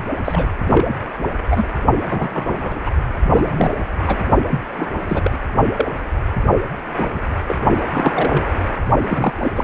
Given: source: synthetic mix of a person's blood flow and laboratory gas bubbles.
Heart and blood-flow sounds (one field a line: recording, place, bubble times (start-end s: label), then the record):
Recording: Doppler ultrasound of blood flow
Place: precordium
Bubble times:
0.24-0.47 s: bubbles
0.66-0.94 s: bubbles
1.50-1.64 s: bubbles
1.99-2.30 s: bubbles
2.33-2.77 s: bubbles
2.85-2.91 s: bubbles
3.34-3.74 s: bubbles
4.07-4.25 s: bubbles
4.50-4.59 s: bubbles
4.77-4.91 s: bubbles
5.06-5.39 s: bubbles
5.76-5.89 s: bubbles
6.96-7.24 s: bubbles
7.47-7.57 s: bubbles
7.90-8.45 s: bubbles
8.98-9.33 s: bubbles
9.39-9.64 s: bubbles
From the record:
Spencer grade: 3 (all of the cardiac periods contain showers or single bubble signals, but not dominating or overriding the cardiac motion signals)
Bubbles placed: only in the low amplitude regions of the cardiac cycle